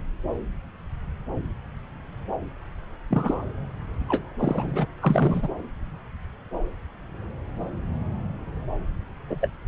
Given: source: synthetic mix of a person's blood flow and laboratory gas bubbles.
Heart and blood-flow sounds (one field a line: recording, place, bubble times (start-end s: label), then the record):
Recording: Doppler ultrasound of blood flow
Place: subclavian vein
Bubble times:
3.10-3.45 s: bubbles
4.07-4.31 s: bubbles
4.39-4.87 s: bubbles
5.00-5.48 s: bubbles
9.30-9.36 s: bubbles
9.41-9.49 s: bubbles
From the record:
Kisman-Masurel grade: 222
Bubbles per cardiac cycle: several, 3 to 8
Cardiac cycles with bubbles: 10 to 50%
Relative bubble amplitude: moderate (0.250 to 0.450)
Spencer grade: 2 (many but less than half of the cardiac periods contain bubble signals, singularly or in groups)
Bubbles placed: anywhere in the cardiac cycle